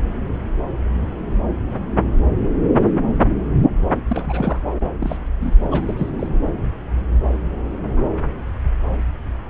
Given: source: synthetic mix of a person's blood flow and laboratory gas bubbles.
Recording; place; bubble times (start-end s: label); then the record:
Doppler ultrasound of blood flow; subclavian vein
4.08-4.63 s: bubbles
5.00-5.17 s: bubbles
5.39-5.54 s: bubbles
5.62-6.11 s: bubbles
6.19-6.27 s: bubbles
From the record:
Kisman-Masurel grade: 222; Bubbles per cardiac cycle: several, 3 to 8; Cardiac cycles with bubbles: 10 to 50%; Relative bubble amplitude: moderate (0.250 to 0.450); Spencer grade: 2 (many but less than half of the cardiac periods contain bubble signals, singularly or in groups); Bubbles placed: anywhere in the cardiac cycle